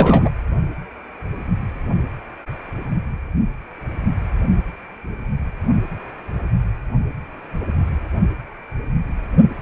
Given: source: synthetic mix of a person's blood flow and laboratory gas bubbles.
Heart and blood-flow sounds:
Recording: Doppler ultrasound of blood flow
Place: precordium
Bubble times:
0.00-0.29 s: bubbles
From the record:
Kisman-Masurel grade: 213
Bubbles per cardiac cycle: several, 3 to 8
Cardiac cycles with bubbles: 1 to 10%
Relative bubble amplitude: loud (0.450 to 0.775)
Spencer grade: 1 (occasional bubble signal discernible with the cardiac motion signal, with majority of cardiac periods free of bubbles)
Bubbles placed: only in the low amplitude regions of the cardiac cycle

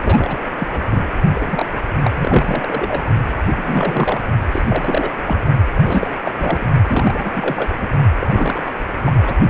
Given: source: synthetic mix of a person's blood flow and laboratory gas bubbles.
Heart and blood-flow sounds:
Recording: Doppler ultrasound of blood flow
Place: precordium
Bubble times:
0.00-0.39 s: bubbles
0.58-0.67 s: bubbles
0.71-1.08 s: bubbles
1.34-1.80 s: bubbles
2.04-2.10 s: bubbles
2.14-3.03 s: bubbles
3.56-4.20 s: bubbles
4.51-4.62 s: bubbles
4.69-5.10 s: bubbles
5.26-5.40 s: bubbles
5.76-6.10 s: bubbles
6.25-6.31 s: bubbles
6.39-6.68 s: bubbles
6.86-7.70 s: bubbles
7.79-7.89 s: bubbles
8.20-8.27 s: bubbles
8.32-8.72 s: bubbles
9.04-9.12 s: bubbles
9.23-9.34 s: bubbles
From the record:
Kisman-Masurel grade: 342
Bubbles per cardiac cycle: rolling drumbeat, 9 or more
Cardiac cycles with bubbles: 100%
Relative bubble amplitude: moderate (0.250 to 0.450)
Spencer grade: 3 (all of the cardiac periods contain showers or single bubble signals, but not dominating or overriding the cardiac motion signals)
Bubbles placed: only in the low amplitude regions of the cardiac cycle

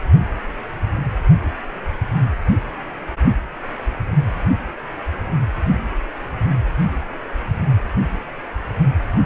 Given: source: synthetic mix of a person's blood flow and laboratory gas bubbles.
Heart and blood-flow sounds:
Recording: Doppler ultrasound of blood flow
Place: precordium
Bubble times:
9.11-9.26 s: bubbles
From the record:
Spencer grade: 2 (many but less than half of the cardiac periods contain bubble signals, singularly or in groups)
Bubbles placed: only in the low amplitude regions of the cardiac cycle

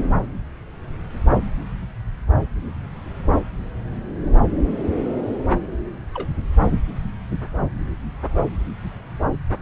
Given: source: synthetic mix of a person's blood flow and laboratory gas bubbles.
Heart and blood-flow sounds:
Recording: Doppler ultrasound of blood flow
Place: subclavian vein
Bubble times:
6.14-6.28 s: bubbles
From the record:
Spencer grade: 1 (occasional bubble signal discernible with the cardiac motion signal, with majority of cardiac periods free of bubbles)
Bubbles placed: anywhere in the cardiac cycle

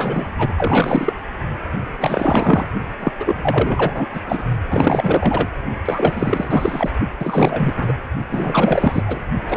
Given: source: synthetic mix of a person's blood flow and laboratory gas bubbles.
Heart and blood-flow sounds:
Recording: Doppler ultrasound of blood flow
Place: precordium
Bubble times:
0.00-0.34 s: bubbles
0.38-0.53 s: bubbles
0.57-1.13 s: bubbles
1.99-2.69 s: bubbles
3.00-3.12 s: bubbles
3.19-4.08 s: bubbles
4.12-4.21 s: bubbles
4.26-4.43 s: bubbles
4.70-5.46 s: bubbles
5.85-6.91 s: bubbles
7.19-7.74 s: bubbles
7.76-7.94 s: bubbles
8.31-9.23 s: bubbles
9.48-9.57 s: bubbles
From the record:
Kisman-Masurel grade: 444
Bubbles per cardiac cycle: continuous sound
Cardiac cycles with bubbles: 100%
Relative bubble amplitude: maximal (0.775 to 0.999)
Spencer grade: 4 (maximum detectable bubble signal sounding continuously throughout systole and diastole of every cardiac period, and overriding the amplitude of the normal cardiac signals)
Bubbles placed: only in the low amplitude regions of the cardiac cycle

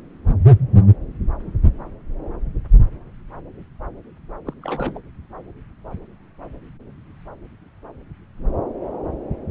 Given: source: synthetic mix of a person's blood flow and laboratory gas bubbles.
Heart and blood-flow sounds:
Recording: Doppler ultrasound of blood flow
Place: subclavian vein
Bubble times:
4.46-4.54 s: bubbles
4.61-5.00 s: bubbles
From the record:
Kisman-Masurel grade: 211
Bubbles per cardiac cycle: several, 3 to 8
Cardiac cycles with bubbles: 1 to 10%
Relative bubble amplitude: barely perceptible (0.100 to 0.250)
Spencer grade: 1 (occasional bubble signal discernible with the cardiac motion signal, with majority of cardiac periods free of bubbles)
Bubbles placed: anywhere in the cardiac cycle

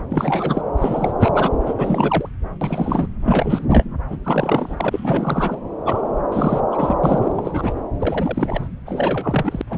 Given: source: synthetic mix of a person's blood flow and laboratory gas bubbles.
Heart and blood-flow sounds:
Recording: Doppler ultrasound of blood flow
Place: subclavian vein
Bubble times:
0.00-0.02 s: bubbles
0.11-0.61 s: bubbles
0.78-1.11 s: bubbles
1.19-1.30 s: bubbles
1.34-1.50 s: bubbles
1.66-1.74 s: bubbles
1.77-2.29 s: bubbles
2.61-3.07 s: bubbles
3.24-3.65 s: bubbles
3.69-3.84 s: bubbles
4.09-4.17 s: bubbles
4.24-5.59 s: bubbles
5.86-6.01 s: bubbles
6.32-6.60 s: bubbles
6.71-6.96 s: bubbles
7.03-7.32 s: bubbles
7.34-7.75 s: bubbles
8.00-8.68 s: bubbles
8.86-9.62 s: bubbles
9.69-9.78 s: bubbles
From the record:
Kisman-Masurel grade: 342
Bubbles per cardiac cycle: rolling drumbeat, 9 or more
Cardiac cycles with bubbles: 100%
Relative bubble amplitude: moderate (0.250 to 0.450)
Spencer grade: 3 (all of the cardiac periods contain showers or single bubble signals, but not dominating or overriding the cardiac motion signals)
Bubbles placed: anywhere in the cardiac cycle

